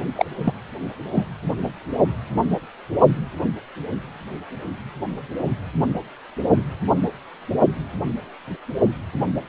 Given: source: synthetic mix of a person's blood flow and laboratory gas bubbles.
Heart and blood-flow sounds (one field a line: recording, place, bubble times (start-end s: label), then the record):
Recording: Doppler ultrasound of blood flow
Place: precordium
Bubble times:
0.15-0.25 s: bubbles
0.38-0.53 s: bubbles
1.12-1.25 s: bubbles
From the record:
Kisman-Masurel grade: 222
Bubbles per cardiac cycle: several, 3 to 8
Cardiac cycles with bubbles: 10 to 50%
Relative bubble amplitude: moderate (0.250 to 0.450)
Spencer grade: 2 (many but less than half of the cardiac periods contain bubble signals, singularly or in groups)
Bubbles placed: only in the low amplitude regions of the cardiac cycle